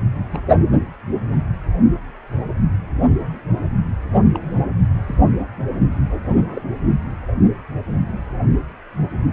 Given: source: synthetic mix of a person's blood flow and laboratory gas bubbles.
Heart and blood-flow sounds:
Doppler ultrasound of blood flow; precordium
0.32-0.41 s: bubbles
4.33-4.60 s: bubbles
5.06-5.17 s: bubbles
6.28-6.37 s: bubbles
6.53-6.62 s: bubbles
From the record:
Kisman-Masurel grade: 121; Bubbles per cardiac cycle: 1 to 2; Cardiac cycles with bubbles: 10 to 50%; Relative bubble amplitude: barely perceptible (0.100 to 0.250); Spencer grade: 2 (many but less than half of the cardiac periods contain bubble signals, singularly or in groups); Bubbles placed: anywhere in the cardiac cycle

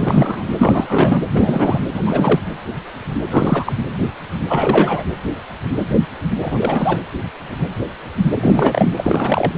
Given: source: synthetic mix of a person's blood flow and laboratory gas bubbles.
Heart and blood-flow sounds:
Doppler ultrasound of blood flow; precordium
0.00-0.44 s: bubbles
0.58-1.23 s: bubbles
1.33-1.79 s: bubbles
1.87-2.02 s: bubbles
2.05-2.40 s: bubbles
3.29-3.73 s: bubbles
4.47-5.04 s: bubbles
6.42-6.97 s: bubbles
8.34-8.93 s: bubbles
8.96-9.53 s: bubbles
From the record:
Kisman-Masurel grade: 333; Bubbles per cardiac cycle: rolling drumbeat, 9 or more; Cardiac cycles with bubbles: 50 to 99%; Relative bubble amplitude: loud (0.450 to 0.775); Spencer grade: 3 (all of the cardiac periods contain showers or single bubble signals, but not dominating or overriding the cardiac motion signals); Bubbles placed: anywhere in the cardiac cycle

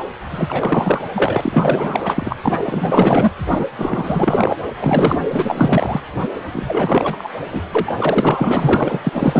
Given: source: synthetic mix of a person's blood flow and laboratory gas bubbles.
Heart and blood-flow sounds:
Doppler ultrasound of blood flow; precordium
0.31-1.04 s: bubbles
1.14-2.36 s: bubbles
2.44-3.31 s: bubbles
3.49-3.65 s: bubbles
3.77-4.56 s: bubbles
4.79-5.18 s: bubbles
5.30-6.00 s: bubbles
6.22-6.28 s: bubbles
6.52-7.31 s: bubbles
7.50-7.62 s: bubbles
7.72-7.92 s: bubbles
7.96-9.01 s: bubbles
9.04-9.10 s: bubbles
9.12-9.40 s: bubbles
From the record:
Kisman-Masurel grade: 444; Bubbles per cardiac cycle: continuous sound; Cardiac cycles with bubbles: 100%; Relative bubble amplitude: maximal (0.775 to 0.999); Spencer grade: 4 (maximum detectable bubble signal sounding continuously throughout systole and diastole of every cardiac period, and overriding the amplitude of the normal cardiac signals); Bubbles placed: anywhere in the cardiac cycle

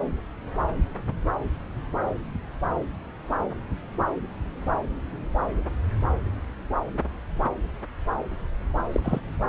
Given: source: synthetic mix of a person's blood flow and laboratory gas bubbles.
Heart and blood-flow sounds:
Doppler ultrasound of blood flow; subclavian vein
8.93-9.00 s: bubbles
9.03-9.20 s: bubbles
From the record:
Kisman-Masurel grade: 112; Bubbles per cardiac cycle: 1 to 2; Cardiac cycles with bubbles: 1 to 10%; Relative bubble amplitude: moderate (0.250 to 0.450); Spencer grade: 1 (occasional bubble signal discernible with the cardiac motion signal, with majority of cardiac periods free of bubbles); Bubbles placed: anywhere in the cardiac cycle

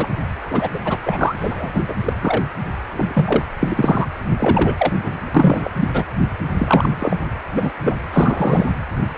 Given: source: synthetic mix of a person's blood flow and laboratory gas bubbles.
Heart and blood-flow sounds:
Doppler ultrasound of blood flow; precordium
0.00-0.07 s: bubbles
0.50-0.69 s: bubbles
0.73-0.80 s: bubbles
0.85-0.98 s: bubbles
1.05-1.71 s: bubbles
1.74-1.80 s: bubbles
1.88-1.95 s: bubbles
2.05-2.13 s: bubbles
2.22-2.42 s: bubbles
2.92-3.45 s: bubbles
3.60-4.08 s: bubbles
4.39-4.75 s: bubbles
4.78-4.95 s: bubbles
5.03-5.15 s: bubbles
5.35-5.70 s: bubbles
5.80-5.89 s: bubbles
5.93-6.04 s: bubbles
6.57-7.32 s: bubbles
7.56-7.72 s: bubbles
7.83-7.97 s: bubbles
8.12-8.66 s: bubbles
9.15-9.18 s: bubbles
From the record:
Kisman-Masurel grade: 243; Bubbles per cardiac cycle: several, 3 to 8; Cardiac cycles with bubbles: 100%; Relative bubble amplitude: loud (0.450 to 0.775); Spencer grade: 3 (all of the cardiac periods contain showers or single bubble signals, but not dominating or overriding the cardiac motion signals); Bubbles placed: anywhere in the cardiac cycle

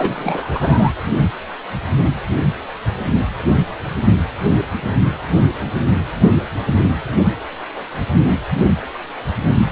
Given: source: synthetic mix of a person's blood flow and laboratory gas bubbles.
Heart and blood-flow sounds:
Doppler ultrasound of blood flow; precordium
0.00-0.93 s: bubbles
From the record:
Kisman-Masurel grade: 213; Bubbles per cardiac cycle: several, 3 to 8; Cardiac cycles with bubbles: 1 to 10%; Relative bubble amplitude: loud (0.450 to 0.775); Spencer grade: 1 (occasional bubble signal discernible with the cardiac motion signal, with majority of cardiac periods free of bubbles); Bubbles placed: anywhere in the cardiac cycle

